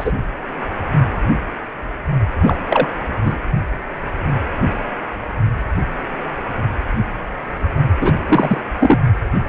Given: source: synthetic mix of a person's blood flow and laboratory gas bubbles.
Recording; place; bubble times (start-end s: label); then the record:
Doppler ultrasound of blood flow; precordium
0.00-0.12 s: bubbles
2.40-2.57 s: bubbles
2.69-2.88 s: bubbles
3.25-3.36 s: bubbles
8.00-8.12 s: bubbles
8.28-8.61 s: bubbles
8.79-8.97 s: bubbles
From the record:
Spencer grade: 2 (many but less than half of the cardiac periods contain bubble signals, singularly or in groups); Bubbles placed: only in the low amplitude regions of the cardiac cycle